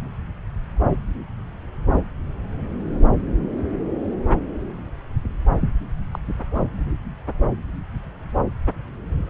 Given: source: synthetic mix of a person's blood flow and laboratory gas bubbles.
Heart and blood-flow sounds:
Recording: Doppler ultrasound of blood flow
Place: subclavian vein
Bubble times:
6.12-6.19 s: bubbles
6.54-6.62 s: bubbles
From the record:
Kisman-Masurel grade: 111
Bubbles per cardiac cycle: 1 to 2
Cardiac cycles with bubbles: 1 to 10%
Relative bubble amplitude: barely perceptible (0.100 to 0.250)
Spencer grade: 1 (occasional bubble signal discernible with the cardiac motion signal, with majority of cardiac periods free of bubbles)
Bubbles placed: anywhere in the cardiac cycle

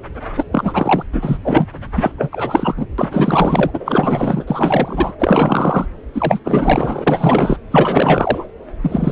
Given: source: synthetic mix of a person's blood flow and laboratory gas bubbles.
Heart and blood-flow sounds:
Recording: Doppler ultrasound of blood flow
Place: subclavian vein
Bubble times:
0.37-0.45 s: bubbles
0.52-1.04 s: bubbles
1.12-1.39 s: bubbles
1.44-1.67 s: bubbles
1.96-2.12 s: bubbles
2.18-2.29 s: bubbles
2.31-2.86 s: bubbles
2.98-3.70 s: bubbles
3.73-4.44 s: bubbles
4.47-5.12 s: bubbles
5.19-5.86 s: bubbles
6.13-6.39 s: bubbles
6.44-7.58 s: bubbles
7.70-8.45 s: bubbles
8.82-9.12 s: bubbles
From the record:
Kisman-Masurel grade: 444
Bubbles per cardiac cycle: continuous sound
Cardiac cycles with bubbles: 100%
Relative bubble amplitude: maximal (0.775 to 0.999)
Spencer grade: 4 (maximum detectable bubble signal sounding continuously throughout systole and diastole of every cardiac period, and overriding the amplitude of the normal cardiac signals)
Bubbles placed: anywhere in the cardiac cycle

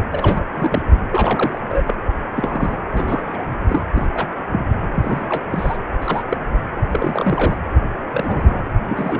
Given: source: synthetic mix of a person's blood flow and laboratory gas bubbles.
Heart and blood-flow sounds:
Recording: Doppler ultrasound of blood flow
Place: precordium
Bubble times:
0.12-0.43 s: bubbles
0.54-0.82 s: bubbles
1.11-1.59 s: bubbles
1.69-1.95 s: bubbles
2.34-2.79 s: bubbles
2.92-3.23 s: bubbles
3.26-3.43 s: bubbles
3.69-3.81 s: bubbles
3.94-4.08 s: bubbles
4.13-4.28 s: bubbles
4.49-4.64 s: bubbles
4.97-5.44 s: bubbles
5.50-5.77 s: bubbles
6.01-6.23 s: bubbles
6.29-6.38 s: bubbles
6.89-7.58 s: bubbles
8.12-8.61 s: bubbles
8.88-9.19 s: bubbles
From the record:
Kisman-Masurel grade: 242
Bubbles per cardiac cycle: several, 3 to 8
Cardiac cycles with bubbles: 100%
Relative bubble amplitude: moderate (0.250 to 0.450)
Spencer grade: 3 (all of the cardiac periods contain showers or single bubble signals, but not dominating or overriding the cardiac motion signals)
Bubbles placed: anywhere in the cardiac cycle

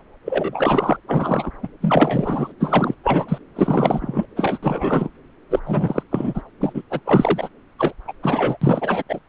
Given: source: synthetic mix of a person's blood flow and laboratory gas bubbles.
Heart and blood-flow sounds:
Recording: Doppler ultrasound of blood flow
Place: subclavian vein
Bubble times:
0.24-0.96 s: bubbles
1.08-1.50 s: bubbles
1.62-1.69 s: bubbles
1.81-2.53 s: bubbles
2.59-2.94 s: bubbles
3.03-3.38 s: bubbles
3.55-4.25 s: bubbles
4.36-4.58 s: bubbles
4.62-5.09 s: bubbles
5.50-5.60 s: bubbles
5.66-6.03 s: bubbles
6.11-6.43 s: bubbles
6.60-6.82 s: bubbles
6.90-7.00 s: bubbles
7.05-7.49 s: bubbles
7.79-7.93 s: bubbles
8.07-8.12 s: bubbles
8.22-8.57 s: bubbles
8.61-9.02 s: bubbles
9.08-9.19 s: bubbles
From the record:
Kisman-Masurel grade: 343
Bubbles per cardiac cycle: rolling drumbeat, 9 or more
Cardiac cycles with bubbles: 100%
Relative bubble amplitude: loud (0.450 to 0.775)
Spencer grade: 3 (all of the cardiac periods contain showers or single bubble signals, but not dominating or overriding the cardiac motion signals)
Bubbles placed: anywhere in the cardiac cycle

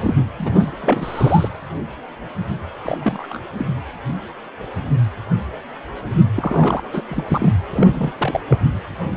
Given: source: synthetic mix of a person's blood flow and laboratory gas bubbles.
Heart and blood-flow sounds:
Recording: Doppler ultrasound of blood flow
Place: precordium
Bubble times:
0.00-0.15 s: bubbles
0.38-0.72 s: bubbles
0.80-1.49 s: bubbles
2.83-2.98 s: bubbles
3.01-3.41 s: bubbles
3.57-3.68 s: bubbles
6.36-6.82 s: bubbles
6.92-7.04 s: bubbles
7.09-7.24 s: bubbles
7.28-7.52 s: bubbles
7.73-8.12 s: bubbles
8.18-8.40 s: bubbles
8.49-8.58 s: bubbles
From the record:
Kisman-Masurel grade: 232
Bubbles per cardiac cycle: several, 3 to 8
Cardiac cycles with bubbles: 50 to 99%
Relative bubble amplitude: moderate (0.250 to 0.450)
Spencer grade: 3 (all of the cardiac periods contain showers or single bubble signals, but not dominating or overriding the cardiac motion signals)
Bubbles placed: anywhere in the cardiac cycle

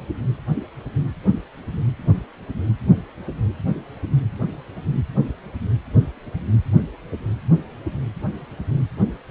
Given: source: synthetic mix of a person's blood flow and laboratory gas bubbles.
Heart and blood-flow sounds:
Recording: Doppler ultrasound of blood flow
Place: precordium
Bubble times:
no bubbles
From the record:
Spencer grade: 0 (complete lack of bubble signals)

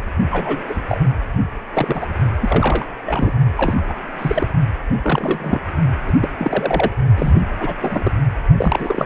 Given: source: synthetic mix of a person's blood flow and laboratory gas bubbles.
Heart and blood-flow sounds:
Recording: Doppler ultrasound of blood flow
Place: precordium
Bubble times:
0.31-0.64 s: bubbles
0.69-0.81 s: bubbles
0.89-1.02 s: bubbles
1.73-2.06 s: bubbles
2.41-2.85 s: bubbles
3.06-3.33 s: bubbles
3.56-3.94 s: bubbles
4.19-4.48 s: bubbles
5.04-5.60 s: bubbles
6.06-6.13 s: bubbles
6.21-6.29 s: bubbles
6.38-6.90 s: bubbles
7.16-7.46 s: bubbles
7.59-7.73 s: bubbles
7.80-8.12 s: bubbles
8.57-9.06 s: bubbles
From the record:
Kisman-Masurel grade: 232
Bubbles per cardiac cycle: several, 3 to 8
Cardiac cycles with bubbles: 50 to 99%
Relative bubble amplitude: moderate (0.250 to 0.450)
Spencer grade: 3 (all of the cardiac periods contain showers or single bubble signals, but not dominating or overriding the cardiac motion signals)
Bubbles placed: only in the low amplitude regions of the cardiac cycle

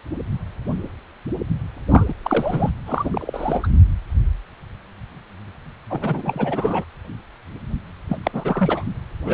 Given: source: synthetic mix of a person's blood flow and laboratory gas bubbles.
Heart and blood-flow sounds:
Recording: Doppler ultrasound of blood flow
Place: precordium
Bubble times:
1.90-2.14 s: bubbles
2.23-2.70 s: bubbles
2.86-3.67 s: bubbles
5.90-6.85 s: bubbles
8.08-8.17 s: bubbles
8.23-8.84 s: bubbles
9.25-9.34 s: bubbles
From the record:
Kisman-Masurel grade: 332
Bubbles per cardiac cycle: rolling drumbeat, 9 or more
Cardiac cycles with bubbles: 50 to 99%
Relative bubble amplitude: moderate (0.250 to 0.450)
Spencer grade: 3 (all of the cardiac periods contain showers or single bubble signals, but not dominating or overriding the cardiac motion signals)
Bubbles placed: anywhere in the cardiac cycle

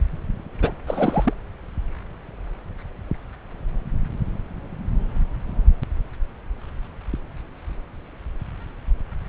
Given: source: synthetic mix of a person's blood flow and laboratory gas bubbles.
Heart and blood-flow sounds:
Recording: Doppler ultrasound of blood flow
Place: subclavian vein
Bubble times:
0.61-0.72 s: bubbles
0.87-1.33 s: bubbles
From the record:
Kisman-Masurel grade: 222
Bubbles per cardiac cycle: several, 3 to 8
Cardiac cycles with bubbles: 10 to 50%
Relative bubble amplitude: moderate (0.250 to 0.450)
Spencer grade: 2 (many but less than half of the cardiac periods contain bubble signals, singularly or in groups)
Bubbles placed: anywhere in the cardiac cycle

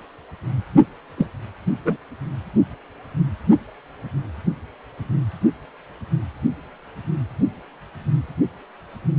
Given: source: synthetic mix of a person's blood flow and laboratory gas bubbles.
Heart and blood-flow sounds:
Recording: Doppler ultrasound of blood flow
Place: precordium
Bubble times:
1.17-1.27 s: bubbles
1.85-1.97 s: bubbles
From the record:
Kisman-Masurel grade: 112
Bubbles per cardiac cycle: 1 to 2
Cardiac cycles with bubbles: 1 to 10%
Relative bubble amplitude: moderate (0.250 to 0.450)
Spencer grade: 1 (occasional bubble signal discernible with the cardiac motion signal, with majority of cardiac periods free of bubbles)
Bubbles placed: only in the low amplitude regions of the cardiac cycle

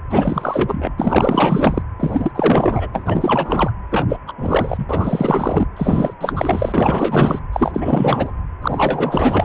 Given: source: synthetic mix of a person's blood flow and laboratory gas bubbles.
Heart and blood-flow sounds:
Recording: Doppler ultrasound of blood flow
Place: precordium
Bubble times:
0.09-0.92 s: bubbles
0.98-1.82 s: bubbles
1.99-2.32 s: bubbles
2.34-2.88 s: bubbles
2.92-3.71 s: bubbles
3.90-4.06 s: bubbles
4.08-4.17 s: bubbles
4.27-4.33 s: bubbles
4.38-4.85 s: bubbles
4.89-5.65 s: bubbles
5.76-6.14 s: bubbles
6.21-7.39 s: bubbles
7.53-8.31 s: bubbles
8.62-9.44 s: bubbles
From the record:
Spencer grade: 4 (maximum detectable bubble signal sounding continuously throughout systole and diastole of every cardiac period, and overriding the amplitude of the normal cardiac signals)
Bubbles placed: anywhere in the cardiac cycle

